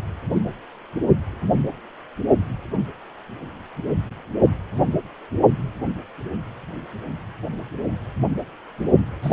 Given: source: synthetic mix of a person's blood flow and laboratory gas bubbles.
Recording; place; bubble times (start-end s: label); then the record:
Doppler ultrasound of blood flow; precordium
0.33-0.41 s: bubbles
9.22-9.33 s: bubbles
From the record:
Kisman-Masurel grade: 122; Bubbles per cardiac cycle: 1 to 2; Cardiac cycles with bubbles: 10 to 50%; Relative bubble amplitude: moderate (0.250 to 0.450); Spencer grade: 2 (many but less than half of the cardiac periods contain bubble signals, singularly or in groups); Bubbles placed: only in the low amplitude regions of the cardiac cycle